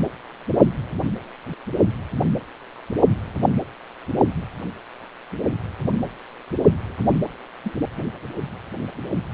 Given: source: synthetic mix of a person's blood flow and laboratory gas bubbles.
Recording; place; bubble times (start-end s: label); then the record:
Doppler ultrasound of blood flow; precordium
7.04-7.13 s: bubbles
7.63-7.75 s: bubbles
From the record:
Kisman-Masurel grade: 111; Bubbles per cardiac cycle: 1 to 2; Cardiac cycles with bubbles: 1 to 10%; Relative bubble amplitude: barely perceptible (0.100 to 0.250); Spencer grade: 1 (occasional bubble signal discernible with the cardiac motion signal, with majority of cardiac periods free of bubbles); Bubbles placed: only in the low amplitude regions of the cardiac cycle